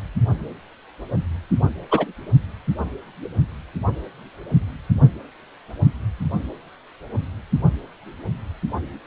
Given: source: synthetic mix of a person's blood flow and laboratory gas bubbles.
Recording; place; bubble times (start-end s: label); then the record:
Doppler ultrasound of blood flow; precordium
1.91-2.06 s: bubbles
From the record:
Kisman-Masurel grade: 113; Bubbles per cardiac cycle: 1 to 2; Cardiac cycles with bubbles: 1 to 10%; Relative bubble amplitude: loud (0.450 to 0.775); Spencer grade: 1 (occasional bubble signal discernible with the cardiac motion signal, with majority of cardiac periods free of bubbles); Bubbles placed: only in the low amplitude regions of the cardiac cycle